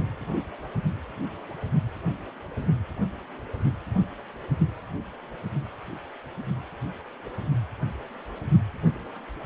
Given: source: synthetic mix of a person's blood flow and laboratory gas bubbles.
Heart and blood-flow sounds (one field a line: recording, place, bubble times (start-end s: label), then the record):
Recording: Doppler ultrasound of blood flow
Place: precordium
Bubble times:
no bubbles
From the record:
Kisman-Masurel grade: 000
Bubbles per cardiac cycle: 0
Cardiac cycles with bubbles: 0%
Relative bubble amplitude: no bubbles discernible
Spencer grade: 0 (complete lack of bubble signals)